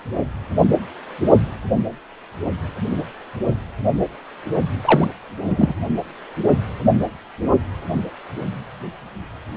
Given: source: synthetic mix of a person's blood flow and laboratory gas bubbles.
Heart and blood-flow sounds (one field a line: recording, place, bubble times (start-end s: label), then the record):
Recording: Doppler ultrasound of blood flow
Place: precordium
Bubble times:
4.85-5.09 s: bubbles
5.45-5.75 s: bubbles
From the record:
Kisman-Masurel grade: 223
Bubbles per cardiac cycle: several, 3 to 8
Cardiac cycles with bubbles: 10 to 50%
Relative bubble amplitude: loud (0.450 to 0.775)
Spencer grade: 2 (many but less than half of the cardiac periods contain bubble signals, singularly or in groups)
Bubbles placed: only in the low amplitude regions of the cardiac cycle